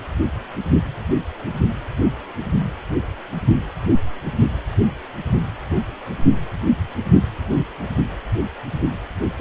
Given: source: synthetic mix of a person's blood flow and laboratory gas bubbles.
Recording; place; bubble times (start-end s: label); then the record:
Doppler ultrasound of blood flow; precordium
9.38-9.41 s: bubbles
From the record:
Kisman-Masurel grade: 213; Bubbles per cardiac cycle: several, 3 to 8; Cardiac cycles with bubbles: 1 to 10%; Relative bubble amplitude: loud (0.450 to 0.775); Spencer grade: 1 (occasional bubble signal discernible with the cardiac motion signal, with majority of cardiac periods free of bubbles); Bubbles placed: only in the low amplitude regions of the cardiac cycle